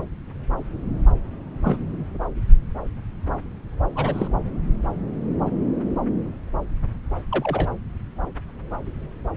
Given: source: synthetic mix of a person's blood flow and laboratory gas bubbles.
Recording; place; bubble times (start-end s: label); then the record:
Doppler ultrasound of blood flow; subclavian vein
1.64-1.77 s: bubbles
3.95-4.28 s: bubbles
7.31-7.68 s: bubbles
From the record:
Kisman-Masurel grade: 122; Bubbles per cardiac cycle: 1 to 2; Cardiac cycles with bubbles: 10 to 50%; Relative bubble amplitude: moderate (0.250 to 0.450); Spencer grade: 2 (many but less than half of the cardiac periods contain bubble signals, singularly or in groups); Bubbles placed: anywhere in the cardiac cycle